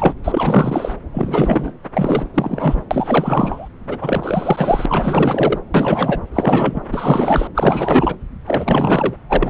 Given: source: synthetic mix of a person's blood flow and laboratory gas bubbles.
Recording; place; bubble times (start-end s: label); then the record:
Doppler ultrasound of blood flow; subclavian vein
0.00-0.15 s: bubbles
0.24-0.93 s: bubbles
1.14-1.72 s: bubbles
1.95-2.30 s: bubbles
2.34-2.83 s: bubbles
2.91-3.69 s: bubbles
3.88-4.86 s: bubbles
4.88-5.59 s: bubbles
5.74-6.21 s: bubbles
6.33-6.81 s: bubbles
6.90-7.47 s: bubbles
7.54-8.16 s: bubbles
8.46-9.16 s: bubbles
9.29-9.50 s: bubbles
From the record:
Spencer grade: 4 (maximum detectable bubble signal sounding continuously throughout systole and diastole of every cardiac period, and overriding the amplitude of the normal cardiac signals); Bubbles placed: anywhere in the cardiac cycle